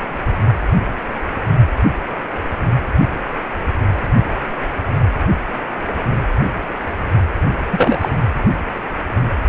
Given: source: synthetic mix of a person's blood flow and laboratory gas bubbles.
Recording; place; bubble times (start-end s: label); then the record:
Doppler ultrasound of blood flow; precordium
7.71-8.09 s: bubbles
From the record:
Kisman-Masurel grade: 213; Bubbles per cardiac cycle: several, 3 to 8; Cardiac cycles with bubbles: 1 to 10%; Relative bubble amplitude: loud (0.450 to 0.775); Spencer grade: 1 (occasional bubble signal discernible with the cardiac motion signal, with majority of cardiac periods free of bubbles); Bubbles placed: anywhere in the cardiac cycle